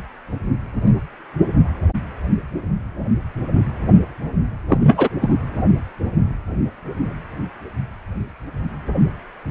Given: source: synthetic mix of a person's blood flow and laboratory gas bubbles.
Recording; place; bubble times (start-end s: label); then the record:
Doppler ultrasound of blood flow; precordium
4.68-5.08 s: bubbles
5.21-5.30 s: bubbles
From the record:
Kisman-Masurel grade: 213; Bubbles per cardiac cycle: several, 3 to 8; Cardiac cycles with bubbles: 1 to 10%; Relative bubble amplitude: loud (0.450 to 0.775); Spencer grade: 1 (occasional bubble signal discernible with the cardiac motion signal, with majority of cardiac periods free of bubbles); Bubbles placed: anywhere in the cardiac cycle